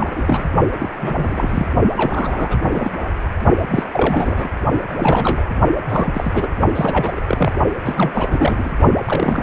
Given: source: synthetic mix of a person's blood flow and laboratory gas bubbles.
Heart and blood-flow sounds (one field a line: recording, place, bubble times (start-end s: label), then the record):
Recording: Doppler ultrasound of blood flow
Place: precordium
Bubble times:
0.00-0.50 s: bubbles
0.72-0.77 s: bubbles
0.79-0.89 s: bubbles
0.98-1.67 s: bubbles
1.95-2.92 s: bubbles
3.70-3.84 s: bubbles
3.93-4.48 s: bubbles
4.92-5.46 s: bubbles
5.88-6.50 s: bubbles
6.75-7.21 s: bubbles
7.27-7.53 s: bubbles
7.86-8.71 s: bubbles
9.05-9.43 s: bubbles
From the record:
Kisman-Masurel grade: 342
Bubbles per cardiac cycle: rolling drumbeat, 9 or more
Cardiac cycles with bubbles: 100%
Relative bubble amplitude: moderate (0.250 to 0.450)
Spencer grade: 3 (all of the cardiac periods contain showers or single bubble signals, but not dominating or overriding the cardiac motion signals)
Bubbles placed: only in the low amplitude regions of the cardiac cycle